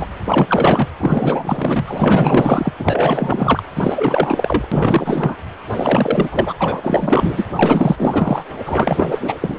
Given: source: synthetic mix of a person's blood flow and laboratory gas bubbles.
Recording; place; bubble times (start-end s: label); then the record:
Doppler ultrasound of blood flow; precordium
0.00-0.07 s: bubbles
0.24-0.88 s: bubbles
0.98-2.73 s: bubbles
2.78-3.62 s: bubbles
3.75-4.68 s: bubbles
4.71-5.36 s: bubbles
5.70-6.54 s: bubbles
6.59-7.47 s: bubbles
7.55-8.44 s: bubbles
8.66-9.07 s: bubbles
9.11-9.34 s: bubbles
9.40-9.59 s: bubbles
From the record:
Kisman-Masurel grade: 444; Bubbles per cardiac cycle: continuous sound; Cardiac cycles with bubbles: 100%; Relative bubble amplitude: maximal (0.775 to 0.999); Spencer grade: 4 (maximum detectable bubble signal sounding continuously throughout systole and diastole of every cardiac period, and overriding the amplitude of the normal cardiac signals); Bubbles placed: anywhere in the cardiac cycle